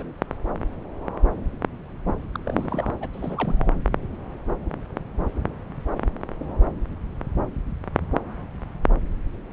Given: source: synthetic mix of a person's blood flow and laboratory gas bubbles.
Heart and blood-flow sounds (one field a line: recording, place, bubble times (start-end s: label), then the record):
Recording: Doppler ultrasound of blood flow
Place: subclavian vein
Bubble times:
0.00-0.04 s: bubbles
2.35-2.38 s: bubbles
2.45-2.92 s: bubbles
3.00-3.09 s: bubbles
3.14-3.68 s: bubbles
From the record:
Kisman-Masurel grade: 221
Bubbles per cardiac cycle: several, 3 to 8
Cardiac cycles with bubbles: 10 to 50%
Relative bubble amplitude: barely perceptible (0.100 to 0.250)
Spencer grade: 2 (many but less than half of the cardiac periods contain bubble signals, singularly or in groups)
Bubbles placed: anywhere in the cardiac cycle